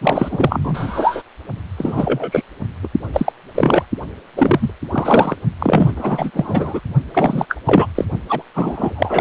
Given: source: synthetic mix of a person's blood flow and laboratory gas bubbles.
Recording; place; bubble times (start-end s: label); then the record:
Doppler ultrasound of blood flow; precordium
0.01-1.22 s: bubbles
1.77-2.43 s: bubbles
2.83-2.88 s: bubbles
3.13-3.33 s: bubbles
3.55-3.86 s: bubbles
4.37-4.71 s: bubbles
4.92-5.35 s: bubbles
5.59-6.31 s: bubbles
6.33-6.80 s: bubbles
7.13-7.46 s: bubbles
7.48-7.56 s: bubbles
7.66-7.86 s: bubbles
7.95-8.04 s: bubbles
8.29-8.42 s: bubbles
8.54-9.21 s: bubbles
From the record:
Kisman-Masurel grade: 333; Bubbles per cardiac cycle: rolling drumbeat, 9 or more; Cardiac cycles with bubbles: 50 to 99%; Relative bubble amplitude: loud (0.450 to 0.775); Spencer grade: 3 (all of the cardiac periods contain showers or single bubble signals, but not dominating or overriding the cardiac motion signals); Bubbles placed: only in the low amplitude regions of the cardiac cycle